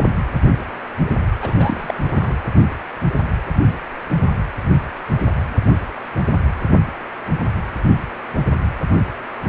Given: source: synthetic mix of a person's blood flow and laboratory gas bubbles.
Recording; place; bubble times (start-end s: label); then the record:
Doppler ultrasound of blood flow; precordium
1.40-1.94 s: bubbles
2.04-2.35 s: bubbles
From the record:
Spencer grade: 2 (many but less than half of the cardiac periods contain bubble signals, singularly or in groups); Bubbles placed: anywhere in the cardiac cycle